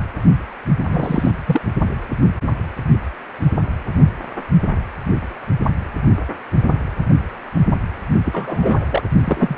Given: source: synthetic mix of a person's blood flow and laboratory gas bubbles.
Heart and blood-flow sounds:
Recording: Doppler ultrasound of blood flow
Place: precordium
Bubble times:
0.88-1.31 s: bubbles
1.46-1.61 s: bubbles
8.25-9.10 s: bubbles
9.24-9.57 s: bubbles
From the record:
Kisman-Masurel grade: 222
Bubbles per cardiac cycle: several, 3 to 8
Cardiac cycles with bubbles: 10 to 50%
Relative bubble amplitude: moderate (0.250 to 0.450)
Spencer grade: 2 (many but less than half of the cardiac periods contain bubble signals, singularly or in groups)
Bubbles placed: only in the low amplitude regions of the cardiac cycle

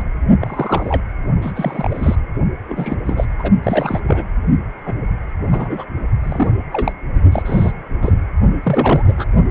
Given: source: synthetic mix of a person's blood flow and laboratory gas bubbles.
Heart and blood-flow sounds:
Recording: Doppler ultrasound of blood flow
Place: precordium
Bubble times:
0.00-0.02 s: bubbles
0.40-1.01 s: bubbles
1.42-1.52 s: bubbles
1.55-2.15 s: bubbles
2.69-2.95 s: bubbles
3.06-3.25 s: bubbles
3.39-3.51 s: bubbles
3.62-4.00 s: bubbles
4.07-4.24 s: bubbles
4.85-4.95 s: bubbles
5.45-5.84 s: bubbles
6.23-6.50 s: bubbles
6.72-6.93 s: bubbles
7.32-7.72 s: bubbles
8.02-8.12 s: bubbles
8.63-9.13 s: bubbles
9.17-9.24 s: bubbles
From the record:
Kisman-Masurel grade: 242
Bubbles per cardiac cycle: several, 3 to 8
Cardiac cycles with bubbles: 100%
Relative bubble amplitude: moderate (0.250 to 0.450)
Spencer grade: 3 (all of the cardiac periods contain showers or single bubble signals, but not dominating or overriding the cardiac motion signals)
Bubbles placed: only in the low amplitude regions of the cardiac cycle

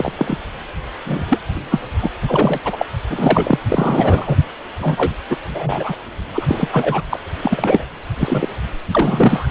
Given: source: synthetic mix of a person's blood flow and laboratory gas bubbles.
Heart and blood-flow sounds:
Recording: Doppler ultrasound of blood flow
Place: precordium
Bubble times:
0.00-0.13 s: bubbles
0.16-0.38 s: bubbles
1.06-1.26 s: bubbles
1.30-1.41 s: bubbles
1.71-1.81 s: bubbles
2.01-2.10 s: bubbles
2.22-2.59 s: bubbles
2.65-2.86 s: bubbles
3.09-3.58 s: bubbles
3.69-4.37 s: bubbles
4.79-5.14 s: bubbles
5.29-5.37 s: bubbles
5.47-5.95 s: bubbles
6.34-6.68 s: bubbles
6.72-7.01 s: bubbles
7.10-7.19 s: bubbles
7.42-7.85 s: bubbles
8.20-8.47 s: bubbles
8.93-9.48 s: bubbles
From the record:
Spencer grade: 3 (all of the cardiac periods contain showers or single bubble signals, but not dominating or overriding the cardiac motion signals)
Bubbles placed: anywhere in the cardiac cycle

